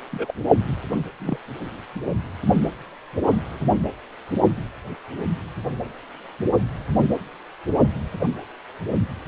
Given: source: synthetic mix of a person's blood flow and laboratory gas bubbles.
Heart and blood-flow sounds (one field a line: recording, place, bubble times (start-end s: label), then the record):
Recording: Doppler ultrasound of blood flow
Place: precordium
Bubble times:
0.12-0.32 s: bubbles
1.20-1.37 s: bubbles
3.29-3.36 s: bubbles
From the record:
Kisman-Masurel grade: 121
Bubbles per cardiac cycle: 1 to 2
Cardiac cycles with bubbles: 10 to 50%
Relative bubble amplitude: barely perceptible (0.100 to 0.250)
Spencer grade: 2 (many but less than half of the cardiac periods contain bubble signals, singularly or in groups)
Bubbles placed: anywhere in the cardiac cycle